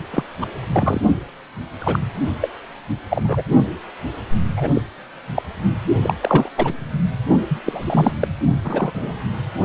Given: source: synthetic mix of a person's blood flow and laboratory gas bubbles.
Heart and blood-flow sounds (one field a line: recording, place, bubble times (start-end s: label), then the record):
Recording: Doppler ultrasound of blood flow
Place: precordium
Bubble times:
0.11-0.24 s: bubbles
0.41-0.46 s: bubbles
0.72-1.01 s: bubbles
1.79-1.99 s: bubbles
2.41-2.50 s: bubbles
3.10-3.42 s: bubbles
4.56-4.71 s: bubbles
4.74-4.81 s: bubbles
5.34-5.42 s: bubbles
6.02-6.15 s: bubbles
6.21-6.49 s: bubbles
6.56-6.74 s: bubbles
7.49-7.59 s: bubbles
7.65-8.12 s: bubbles
8.20-8.28 s: bubbles
8.63-8.91 s: bubbles
8.94-9.17 s: bubbles
From the record:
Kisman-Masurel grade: 243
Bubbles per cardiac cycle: several, 3 to 8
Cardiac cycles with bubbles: 100%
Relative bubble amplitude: loud (0.450 to 0.775)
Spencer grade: 3 (all of the cardiac periods contain showers or single bubble signals, but not dominating or overriding the cardiac motion signals)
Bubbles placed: only in the low amplitude regions of the cardiac cycle